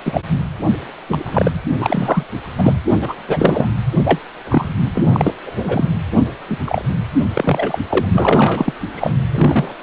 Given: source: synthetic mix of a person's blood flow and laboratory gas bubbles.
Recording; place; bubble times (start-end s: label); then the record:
Doppler ultrasound of blood flow; precordium
0.05-0.21 s: bubbles
1.08-1.51 s: bubbles
1.78-2.23 s: bubbles
2.57-2.73 s: bubbles
2.91-2.98 s: bubbles
3.02-3.14 s: bubbles
3.27-3.67 s: bubbles
4.04-4.20 s: bubbles
4.50-4.75 s: bubbles
4.95-5.04 s: bubbles
5.12-5.33 s: bubbles
5.46-5.87 s: bubbles
6.48-6.57 s: bubbles
6.65-6.82 s: bubbles
7.33-7.79 s: bubbles
7.89-8.06 s: bubbles
8.12-8.74 s: bubbles
8.96-9.12 s: bubbles
9.31-9.73 s: bubbles
From the record:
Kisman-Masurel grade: 243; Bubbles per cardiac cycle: several, 3 to 8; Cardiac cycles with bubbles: 100%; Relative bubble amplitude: loud (0.450 to 0.775); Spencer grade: 3 (all of the cardiac periods contain showers or single bubble signals, but not dominating or overriding the cardiac motion signals); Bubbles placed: anywhere in the cardiac cycle